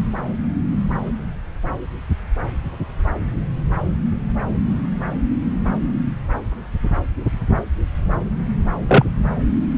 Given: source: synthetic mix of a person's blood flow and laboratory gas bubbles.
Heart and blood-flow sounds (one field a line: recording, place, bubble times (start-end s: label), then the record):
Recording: Doppler ultrasound of blood flow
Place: subclavian vein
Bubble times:
8.88-9.04 s: bubbles
From the record:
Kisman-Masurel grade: 113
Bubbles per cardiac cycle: 1 to 2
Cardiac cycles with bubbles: 1 to 10%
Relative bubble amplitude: loud (0.450 to 0.775)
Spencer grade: 1 (occasional bubble signal discernible with the cardiac motion signal, with majority of cardiac periods free of bubbles)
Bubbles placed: anywhere in the cardiac cycle